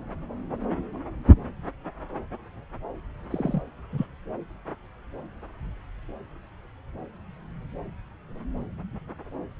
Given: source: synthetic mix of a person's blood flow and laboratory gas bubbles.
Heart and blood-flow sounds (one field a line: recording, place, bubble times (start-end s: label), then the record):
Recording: Doppler ultrasound of blood flow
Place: subclavian vein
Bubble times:
3.31-3.62 s: bubbles
3.93-4.06 s: bubbles
From the record:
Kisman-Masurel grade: 211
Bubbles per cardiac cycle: several, 3 to 8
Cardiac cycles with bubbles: 1 to 10%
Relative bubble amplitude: barely perceptible (0.100 to 0.250)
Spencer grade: 1 (occasional bubble signal discernible with the cardiac motion signal, with majority of cardiac periods free of bubbles)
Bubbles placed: anywhere in the cardiac cycle